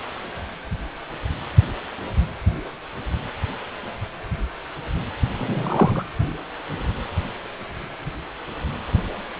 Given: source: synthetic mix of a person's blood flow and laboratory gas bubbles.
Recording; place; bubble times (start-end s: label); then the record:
Doppler ultrasound of blood flow; precordium
5.39-6.05 s: bubbles
From the record:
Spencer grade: 2 (many but less than half of the cardiac periods contain bubble signals, singularly or in groups); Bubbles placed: anywhere in the cardiac cycle